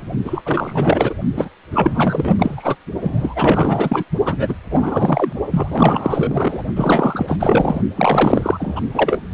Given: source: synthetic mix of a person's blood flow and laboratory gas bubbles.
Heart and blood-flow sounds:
Doppler ultrasound of blood flow; precordium
0.24-0.41 s: bubbles
0.45-1.14 s: bubbles
1.36-1.49 s: bubbles
1.71-2.76 s: bubbles
3.01-4.04 s: bubbles
4.24-4.55 s: bubbles
4.70-5.33 s: bubbles
5.51-6.63 s: bubbles
6.75-7.81 s: bubbles
7.95-8.82 s: bubbles
8.94-9.25 s: bubbles
From the record:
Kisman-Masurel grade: 444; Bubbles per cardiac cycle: continuous sound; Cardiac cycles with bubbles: 100%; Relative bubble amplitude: maximal (0.775 to 0.999); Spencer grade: 4 (maximum detectable bubble signal sounding continuously throughout systole and diastole of every cardiac period, and overriding the amplitude of the normal cardiac signals); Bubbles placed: only in the low amplitude regions of the cardiac cycle

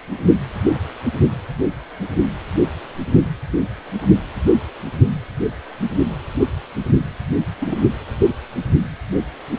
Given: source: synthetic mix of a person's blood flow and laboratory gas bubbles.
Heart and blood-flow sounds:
Doppler ultrasound of blood flow; precordium
7.62-7.78 s: bubbles
From the record:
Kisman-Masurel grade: 111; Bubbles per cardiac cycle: 1 to 2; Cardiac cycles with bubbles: 1 to 10%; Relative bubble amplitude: barely perceptible (0.100 to 0.250); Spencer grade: 1 (occasional bubble signal discernible with the cardiac motion signal, with majority of cardiac periods free of bubbles); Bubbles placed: anywhere in the cardiac cycle

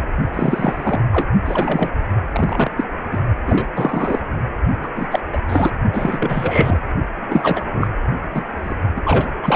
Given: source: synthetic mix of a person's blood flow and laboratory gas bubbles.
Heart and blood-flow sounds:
Doppler ultrasound of blood flow; precordium
0.33-1.01 s: bubbles
1.12-1.28 s: bubbles
1.45-1.91 s: bubbles
2.31-2.71 s: bubbles
2.76-2.84 s: bubbles
3.11-3.22 s: bubbles
3.47-3.67 s: bubbles
3.75-4.22 s: bubbles
4.83-4.88 s: bubbles
4.95-5.07 s: bubbles
5.11-5.22 s: bubbles
5.33-5.41 s: bubbles
5.49-5.70 s: bubbles
5.93-6.79 s: bubbles
7.30-7.65 s: bubbles
7.74-7.88 s: bubbles
8.34-8.43 s: bubbles
8.63-8.76 s: bubbles
8.96-9.01 s: bubbles
9.04-9.30 s: bubbles
9.43-9.56 s: bubbles
From the record:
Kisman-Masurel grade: 343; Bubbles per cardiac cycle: rolling drumbeat, 9 or more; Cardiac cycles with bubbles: 100%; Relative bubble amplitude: loud (0.450 to 0.775); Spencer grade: 3 (all of the cardiac periods contain showers or single bubble signals, but not dominating or overriding the cardiac motion signals); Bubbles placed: only in the low amplitude regions of the cardiac cycle

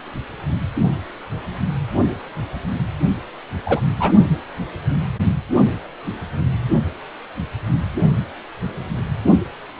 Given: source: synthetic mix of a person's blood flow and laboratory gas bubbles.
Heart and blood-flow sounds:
Doppler ultrasound of blood flow; precordium
3.65-3.80 s: bubbles
3.99-4.12 s: bubbles
From the record:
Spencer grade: 2 (many but less than half of the cardiac periods contain bubble signals, singularly or in groups); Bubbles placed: only in the low amplitude regions of the cardiac cycle

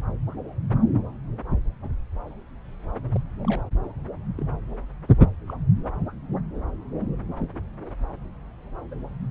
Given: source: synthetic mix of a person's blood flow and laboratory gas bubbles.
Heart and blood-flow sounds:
Doppler ultrasound of blood flow; subclavian vein
1.82-1.89 s: bubbles
3.15-3.19 s: bubbles
3.44-3.63 s: bubbles
4.37-4.45 s: bubbles
5.47-5.54 s: bubbles
7.41-7.49 s: bubbles
8.91-8.95 s: bubbles
From the record:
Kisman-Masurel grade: 121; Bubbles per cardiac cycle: 1 to 2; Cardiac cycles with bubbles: 10 to 50%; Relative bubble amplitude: barely perceptible (0.100 to 0.250); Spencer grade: 2 (many but less than half of the cardiac periods contain bubble signals, singularly or in groups); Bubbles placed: anywhere in the cardiac cycle

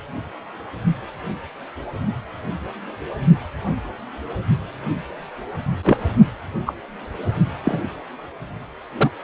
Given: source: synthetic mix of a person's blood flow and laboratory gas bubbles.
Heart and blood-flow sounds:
Doppler ultrasound of blood flow; precordium
5.83-5.98 s: bubbles
6.66-6.74 s: bubbles
7.65-7.80 s: bubbles
8.97-9.11 s: bubbles
From the record:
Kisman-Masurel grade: 123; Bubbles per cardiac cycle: 1 to 2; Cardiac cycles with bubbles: 10 to 50%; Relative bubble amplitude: loud (0.450 to 0.775); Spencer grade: 2 (many but less than half of the cardiac periods contain bubble signals, singularly or in groups); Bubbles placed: anywhere in the cardiac cycle

